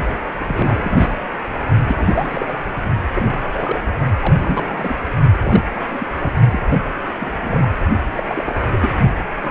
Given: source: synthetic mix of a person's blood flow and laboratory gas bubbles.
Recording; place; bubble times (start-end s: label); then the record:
Doppler ultrasound of blood flow; precordium
0.39-1.16 s: bubbles
1.85-2.59 s: bubbles
3.14-3.39 s: bubbles
3.52-3.83 s: bubbles
4.21-4.96 s: bubbles
5.40-5.65 s: bubbles
5.75-6.07 s: bubbles
6.19-6.33 s: bubbles
6.52-6.60 s: bubbles
6.69-6.83 s: bubbles
7.21-7.30 s: bubbles
7.42-7.68 s: bubbles
8.16-8.23 s: bubbles
8.27-8.55 s: bubbles
8.60-8.68 s: bubbles
8.71-8.90 s: bubbles
9.39-9.51 s: bubbles
From the record:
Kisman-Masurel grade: 332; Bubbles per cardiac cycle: rolling drumbeat, 9 or more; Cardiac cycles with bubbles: 50 to 99%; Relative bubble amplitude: moderate (0.250 to 0.450); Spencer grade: 3 (all of the cardiac periods contain showers or single bubble signals, but not dominating or overriding the cardiac motion signals); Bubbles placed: only in the low amplitude regions of the cardiac cycle